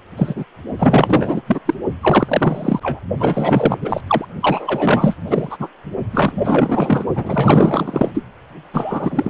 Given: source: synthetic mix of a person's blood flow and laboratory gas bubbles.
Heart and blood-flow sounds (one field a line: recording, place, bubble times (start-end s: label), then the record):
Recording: Doppler ultrasound of blood flow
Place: precordium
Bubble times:
0.17-0.45 s: bubbles
0.78-1.42 s: bubbles
1.47-1.60 s: bubbles
1.65-1.74 s: bubbles
2.01-2.80 s: bubbles
2.83-3.00 s: bubbles
3.20-4.01 s: bubbles
4.07-4.25 s: bubbles
4.40-5.16 s: bubbles
5.28-5.68 s: bubbles
6.12-7.04 s: bubbles
7.14-8.11 s: bubbles
8.14-8.24 s: bubbles
8.73-9.30 s: bubbles
From the record:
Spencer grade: 4 (maximum detectable bubble signal sounding continuously throughout systole and diastole of every cardiac period, and overriding the amplitude of the normal cardiac signals)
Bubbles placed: only in the low amplitude regions of the cardiac cycle